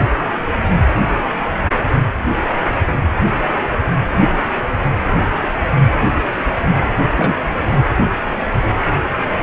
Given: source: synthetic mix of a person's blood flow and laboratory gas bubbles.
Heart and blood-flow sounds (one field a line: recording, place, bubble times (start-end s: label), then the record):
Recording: Doppler ultrasound of blood flow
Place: precordium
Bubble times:
7.15-7.36 s: bubbles
From the record:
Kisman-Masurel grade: 113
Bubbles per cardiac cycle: 1 to 2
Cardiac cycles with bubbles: 1 to 10%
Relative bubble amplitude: loud (0.450 to 0.775)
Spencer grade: 1 (occasional bubble signal discernible with the cardiac motion signal, with majority of cardiac periods free of bubbles)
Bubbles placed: anywhere in the cardiac cycle